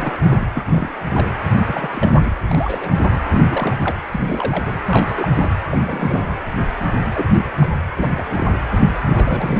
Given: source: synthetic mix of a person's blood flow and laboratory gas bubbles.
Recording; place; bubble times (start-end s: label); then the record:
Doppler ultrasound of blood flow; precordium
0.00-0.48 s: bubbles
0.53-0.63 s: bubbles
0.65-0.95 s: bubbles
1.06-1.27 s: bubbles
1.53-1.58 s: bubbles
1.65-1.88 s: bubbles
1.91-2.34 s: bubbles
2.51-2.98 s: bubbles
3.12-3.17 s: bubbles
3.23-3.41 s: bubbles
3.49-3.95 s: bubbles
4.12-4.79 s: bubbles
4.85-5.28 s: bubbles
5.35-5.50 s: bubbles
5.72-5.79 s: bubbles
5.84-6.39 s: bubbles
6.81-6.86 s: bubbles
7.14-7.26 s: bubbles
7.38-7.49 s: bubbles
7.59-7.70 s: bubbles
7.97-8.26 s: bubbles
8.29-8.47 s: bubbles
9.06-9.60 s: bubbles
From the record:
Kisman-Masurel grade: 342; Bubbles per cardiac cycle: rolling drumbeat, 9 or more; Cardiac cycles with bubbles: 100%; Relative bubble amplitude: moderate (0.250 to 0.450); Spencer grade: 3 (all of the cardiac periods contain showers or single bubble signals, but not dominating or overriding the cardiac motion signals); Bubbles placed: anywhere in the cardiac cycle